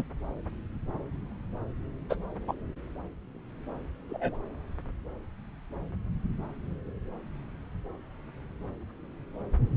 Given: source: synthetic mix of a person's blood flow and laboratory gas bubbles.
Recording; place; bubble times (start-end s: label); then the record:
Doppler ultrasound of blood flow; subclavian vein
0.00-0.04 s: bubbles
2.09-2.15 s: bubbles
2.47-2.54 s: bubbles
4.10-4.38 s: bubbles
From the record:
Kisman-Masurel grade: 122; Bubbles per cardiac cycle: 1 to 2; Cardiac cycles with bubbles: 10 to 50%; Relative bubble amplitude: moderate (0.250 to 0.450); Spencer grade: 2 (many but less than half of the cardiac periods contain bubble signals, singularly or in groups); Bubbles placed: anywhere in the cardiac cycle